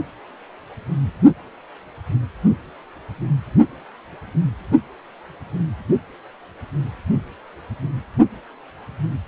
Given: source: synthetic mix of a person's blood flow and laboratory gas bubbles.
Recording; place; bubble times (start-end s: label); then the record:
Doppler ultrasound of blood flow; precordium
no bubbles
From the record:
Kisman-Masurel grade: 000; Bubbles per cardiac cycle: 0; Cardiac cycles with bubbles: 0%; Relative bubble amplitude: no bubbles discernible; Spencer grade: 0 (complete lack of bubble signals)